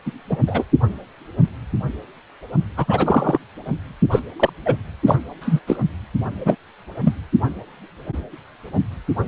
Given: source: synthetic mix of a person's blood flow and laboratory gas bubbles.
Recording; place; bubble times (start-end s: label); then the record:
Doppler ultrasound of blood flow; precordium
0.05-0.11 s: bubbles
0.29-0.37 s: bubbles
0.46-0.64 s: bubbles
2.76-3.38 s: bubbles
4.11-4.20 s: bubbles
4.39-4.50 s: bubbles
4.66-4.75 s: bubbles
5.06-5.17 s: bubbles
5.41-5.60 s: bubbles
5.67-5.77 s: bubbles
6.45-6.55 s: bubbles
7.04-7.14 s: bubbles
From the record:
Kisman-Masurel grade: 233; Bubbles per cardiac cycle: several, 3 to 8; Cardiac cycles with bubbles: 50 to 99%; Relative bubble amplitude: loud (0.450 to 0.775); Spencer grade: 3 (all of the cardiac periods contain showers or single bubble signals, but not dominating or overriding the cardiac motion signals); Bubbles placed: only in the low amplitude regions of the cardiac cycle